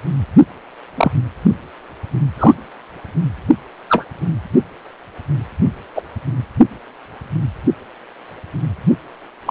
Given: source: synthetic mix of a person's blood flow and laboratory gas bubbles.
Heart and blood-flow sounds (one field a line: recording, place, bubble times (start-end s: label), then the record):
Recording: Doppler ultrasound of blood flow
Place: precordium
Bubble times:
0.97-1.11 s: bubbles
2.38-2.54 s: bubbles
3.89-4.04 s: bubbles
5.95-6.03 s: bubbles
9.46-9.51 s: bubbles
From the record:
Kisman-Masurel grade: 123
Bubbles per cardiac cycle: 1 to 2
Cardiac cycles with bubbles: 10 to 50%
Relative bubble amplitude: loud (0.450 to 0.775)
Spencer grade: 2 (many but less than half of the cardiac periods contain bubble signals, singularly or in groups)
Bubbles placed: anywhere in the cardiac cycle